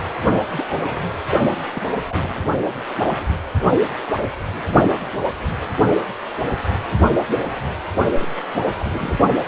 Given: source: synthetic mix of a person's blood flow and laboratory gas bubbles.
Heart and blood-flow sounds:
Doppler ultrasound of blood flow; precordium
0.51-0.65 s: bubbles
0.70-1.09 s: bubbles
1.43-1.47 s: bubbles
1.75-1.83 s: bubbles
2.08-2.35 s: bubbles
8.18-8.40 s: bubbles
8.55-8.73 s: bubbles
8.80-9.19 s: bubbles
From the record:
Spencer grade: 2 (many but less than half of the cardiac periods contain bubble signals, singularly or in groups); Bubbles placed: only in the low amplitude regions of the cardiac cycle

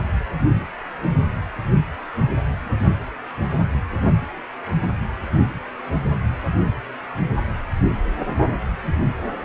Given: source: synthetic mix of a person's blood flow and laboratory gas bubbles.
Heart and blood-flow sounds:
Doppler ultrasound of blood flow; precordium
no bubbles
From the record:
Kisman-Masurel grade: 000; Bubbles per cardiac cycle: 0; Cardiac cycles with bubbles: 0%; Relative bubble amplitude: no bubbles discernible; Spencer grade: 0 (complete lack of bubble signals)

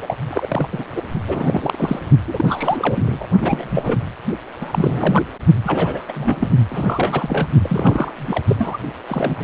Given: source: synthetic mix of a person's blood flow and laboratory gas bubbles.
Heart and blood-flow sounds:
Doppler ultrasound of blood flow; precordium
0.02-0.16 s: bubbles
0.30-0.69 s: bubbles
0.72-0.84 s: bubbles
0.96-1.02 s: bubbles
1.27-1.99 s: bubbles
2.27-3.26 s: bubbles
3.41-3.97 s: bubbles
4.61-5.23 s: bubbles
5.64-6.04 s: bubbles
6.08-6.48 s: bubbles
6.69-7.48 s: bubbles
7.62-8.12 s: bubbles
8.18-8.42 s: bubbles
8.47-8.77 s: bubbles
9.06-9.44 s: bubbles
From the record:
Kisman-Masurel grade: 342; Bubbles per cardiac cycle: rolling drumbeat, 9 or more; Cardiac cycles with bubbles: 100%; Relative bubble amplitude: moderate (0.250 to 0.450); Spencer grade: 3 (all of the cardiac periods contain showers or single bubble signals, but not dominating or overriding the cardiac motion signals); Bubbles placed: only in the low amplitude regions of the cardiac cycle

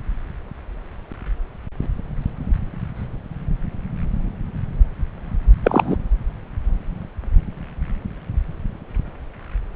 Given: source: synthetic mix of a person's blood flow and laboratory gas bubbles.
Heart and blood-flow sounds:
Doppler ultrasound of blood flow; subclavian vein
5.63-5.96 s: bubbles
From the record:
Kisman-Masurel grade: 113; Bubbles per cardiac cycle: 1 to 2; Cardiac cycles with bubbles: 1 to 10%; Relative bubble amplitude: loud (0.450 to 0.775); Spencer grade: 1 (occasional bubble signal discernible with the cardiac motion signal, with majority of cardiac periods free of bubbles); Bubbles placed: anywhere in the cardiac cycle

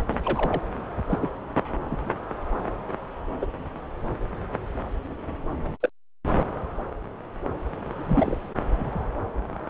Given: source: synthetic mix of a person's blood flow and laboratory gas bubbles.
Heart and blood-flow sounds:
Doppler ultrasound of blood flow; subclavian vein
0.11-0.62 s: bubbles
1.08-1.33 s: bubbles
1.90-2.10 s: bubbles
3.42-3.46 s: bubbles
5.82-5.90 s: bubbles
7.95-8.36 s: bubbles
8.69-9.01 s: bubbles
From the record:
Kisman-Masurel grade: 121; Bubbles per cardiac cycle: 1 to 2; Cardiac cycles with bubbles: 10 to 50%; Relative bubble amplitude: barely perceptible (0.100 to 0.250); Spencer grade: 2 (many but less than half of the cardiac periods contain bubble signals, singularly or in groups); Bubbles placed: anywhere in the cardiac cycle

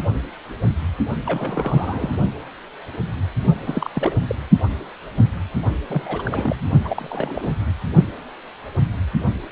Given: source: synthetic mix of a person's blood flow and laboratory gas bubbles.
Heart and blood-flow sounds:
Doppler ultrasound of blood flow; precordium
1.26-2.16 s: bubbles
3.65-3.90 s: bubbles
3.94-4.17 s: bubbles
4.27-4.35 s: bubbles
5.88-6.02 s: bubbles
6.05-6.66 s: bubbles
6.84-7.53 s: bubbles
From the record:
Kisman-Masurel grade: 332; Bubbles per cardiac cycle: rolling drumbeat, 9 or more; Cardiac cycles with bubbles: 50 to 99%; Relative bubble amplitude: moderate (0.250 to 0.450); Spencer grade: 3 (all of the cardiac periods contain showers or single bubble signals, but not dominating or overriding the cardiac motion signals); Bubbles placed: only in the low amplitude regions of the cardiac cycle

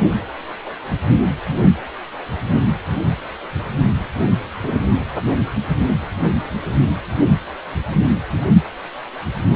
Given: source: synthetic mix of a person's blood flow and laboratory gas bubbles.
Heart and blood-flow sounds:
Doppler ultrasound of blood flow; precordium
4.63-4.78 s: bubbles
From the record:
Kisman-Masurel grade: 113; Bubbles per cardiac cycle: 1 to 2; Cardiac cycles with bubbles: 1 to 10%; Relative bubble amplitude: loud (0.450 to 0.775); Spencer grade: 1 (occasional bubble signal discernible with the cardiac motion signal, with majority of cardiac periods free of bubbles); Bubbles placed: only in the low amplitude regions of the cardiac cycle

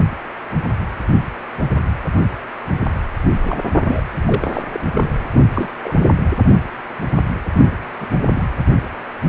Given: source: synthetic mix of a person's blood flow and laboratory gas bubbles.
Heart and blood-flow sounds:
Doppler ultrasound of blood flow; precordium
3.42-3.60 s: bubbles
3.74-3.83 s: bubbles
3.86-4.03 s: bubbles
4.25-4.62 s: bubbles
4.69-4.80 s: bubbles
4.94-5.15 s: bubbles
5.36-5.73 s: bubbles
5.83-5.93 s: bubbles
5.98-6.09 s: bubbles
7.56-7.73 s: bubbles
8.00-8.07 s: bubbles
8.35-8.44 s: bubbles
From the record:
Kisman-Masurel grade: 222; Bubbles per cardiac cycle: several, 3 to 8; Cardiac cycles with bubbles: 10 to 50%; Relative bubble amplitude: moderate (0.250 to 0.450); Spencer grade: 2 (many but less than half of the cardiac periods contain bubble signals, singularly or in groups); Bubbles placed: anywhere in the cardiac cycle

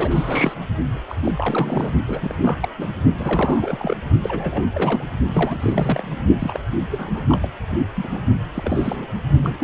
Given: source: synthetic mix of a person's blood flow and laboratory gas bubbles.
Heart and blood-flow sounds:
Doppler ultrasound of blood flow; precordium
0.00-0.55 s: bubbles
1.07-1.31 s: bubbles
1.34-1.94 s: bubbles
2.08-2.35 s: bubbles
2.39-2.69 s: bubbles
2.77-2.89 s: bubbles
3.16-3.97 s: bubbles
4.22-4.63 s: bubbles
4.74-5.04 s: bubbles
5.31-6.21 s: bubbles
6.39-6.59 s: bubbles
6.90-7.21 s: bubbles
7.28-7.50 s: bubbles
7.95-8.23 s: bubbles
8.54-9.07 s: bubbles
9.43-9.64 s: bubbles
From the record:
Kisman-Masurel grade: 342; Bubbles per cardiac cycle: rolling drumbeat, 9 or more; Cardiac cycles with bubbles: 100%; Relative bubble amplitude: moderate (0.250 to 0.450); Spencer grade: 3 (all of the cardiac periods contain showers or single bubble signals, but not dominating or overriding the cardiac motion signals); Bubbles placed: only in the low amplitude regions of the cardiac cycle

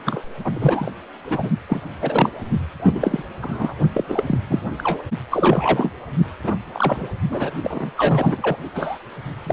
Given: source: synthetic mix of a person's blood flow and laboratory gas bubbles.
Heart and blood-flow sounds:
Doppler ultrasound of blood flow; precordium
0.05-0.20 s: bubbles
0.44-0.91 s: bubbles
1.30-1.50 s: bubbles
1.69-1.81 s: bubbles
2.01-2.29 s: bubbles
2.79-3.23 s: bubbles
3.42-3.74 s: bubbles
3.94-4.04 s: bubbles
4.08-4.24 s: bubbles
4.26-4.39 s: bubbles
4.50-4.59 s: bubbles
4.78-5.02 s: bubbles
5.31-5.91 s: bubbles
6.44-6.55 s: bubbles
6.73-7.09 s: bubbles
7.29-7.50 s: bubbles
7.62-7.92 s: bubbles
7.97-8.56 s: bubbles
8.74-8.98 s: bubbles
9.46-9.53 s: bubbles
From the record:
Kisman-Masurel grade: 242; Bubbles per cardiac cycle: several, 3 to 8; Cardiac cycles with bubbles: 100%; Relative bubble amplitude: moderate (0.250 to 0.450); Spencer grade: 3 (all of the cardiac periods contain showers or single bubble signals, but not dominating or overriding the cardiac motion signals); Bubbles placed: only in the low amplitude regions of the cardiac cycle

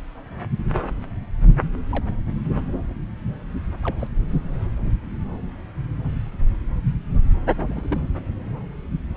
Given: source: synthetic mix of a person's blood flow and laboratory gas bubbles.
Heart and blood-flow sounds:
Doppler ultrasound of blood flow; subclavian vein
1.90-2.12 s: bubbles
3.82-3.96 s: bubbles
3.99-4.07 s: bubbles
4.78-4.92 s: bubbles
7.66-7.99 s: bubbles
From the record:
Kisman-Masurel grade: 121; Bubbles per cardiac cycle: 1 to 2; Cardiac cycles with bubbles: 10 to 50%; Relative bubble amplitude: barely perceptible (0.100 to 0.250); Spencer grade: 2 (many but less than half of the cardiac periods contain bubble signals, singularly or in groups); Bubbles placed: anywhere in the cardiac cycle

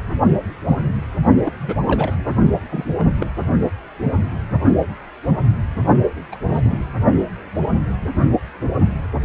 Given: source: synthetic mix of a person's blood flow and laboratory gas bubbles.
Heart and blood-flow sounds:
Doppler ultrasound of blood flow; precordium
1.45-1.53 s: bubbles
1.59-1.82 s: bubbles
1.87-2.16 s: bubbles
2.71-2.84 s: bubbles
2.99-3.05 s: bubbles
3.18-3.26 s: bubbles
6.32-6.38 s: bubbles
6.49-6.86 s: bubbles
From the record:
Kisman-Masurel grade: 222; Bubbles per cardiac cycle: several, 3 to 8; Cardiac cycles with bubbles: 10 to 50%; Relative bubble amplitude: moderate (0.250 to 0.450); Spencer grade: 2 (many but less than half of the cardiac periods contain bubble signals, singularly or in groups); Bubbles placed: only in the low amplitude regions of the cardiac cycle

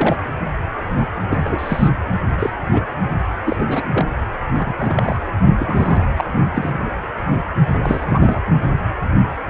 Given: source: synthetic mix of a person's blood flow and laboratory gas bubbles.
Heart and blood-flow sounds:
Doppler ultrasound of blood flow; precordium
0.00-0.17 s: bubbles
1.29-1.89 s: bubbles
2.38-2.50 s: bubbles
2.72-2.83 s: bubbles
3.44-3.56 s: bubbles
3.59-3.65 s: bubbles
3.67-3.88 s: bubbles
3.94-4.05 s: bubbles
4.53-4.75 s: bubbles
4.79-5.18 s: bubbles
5.60-6.08 s: bubbles
6.17-6.25 s: bubbles
6.54-6.87 s: bubbles
7.73-8.39 s: bubbles
From the record:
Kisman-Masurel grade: 232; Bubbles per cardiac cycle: several, 3 to 8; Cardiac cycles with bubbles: 50 to 99%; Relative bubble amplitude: moderate (0.250 to 0.450); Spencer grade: 3 (all of the cardiac periods contain showers or single bubble signals, but not dominating or overriding the cardiac motion signals); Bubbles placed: anywhere in the cardiac cycle

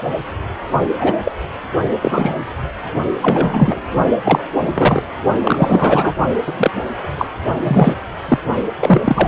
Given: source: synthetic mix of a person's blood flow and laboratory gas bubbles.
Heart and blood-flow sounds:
Doppler ultrasound of blood flow; precordium
0.00-0.09 s: bubbles
0.98-1.17 s: bubbles
1.24-1.32 s: bubbles
2.01-2.34 s: bubbles
3.21-3.75 s: bubbles
4.25-4.46 s: bubbles
4.74-5.03 s: bubbles
5.44-6.15 s: bubbles
6.46-6.54 s: bubbles
6.57-6.71 s: bubbles
7.18-7.28 s: bubbles
7.63-7.95 s: bubbles
8.28-8.38 s: bubbles
8.79-9.28 s: bubbles
From the record:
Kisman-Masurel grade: 243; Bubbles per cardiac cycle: several, 3 to 8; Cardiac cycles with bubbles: 100%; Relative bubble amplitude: loud (0.450 to 0.775); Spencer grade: 3 (all of the cardiac periods contain showers or single bubble signals, but not dominating or overriding the cardiac motion signals); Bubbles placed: only in the low amplitude regions of the cardiac cycle

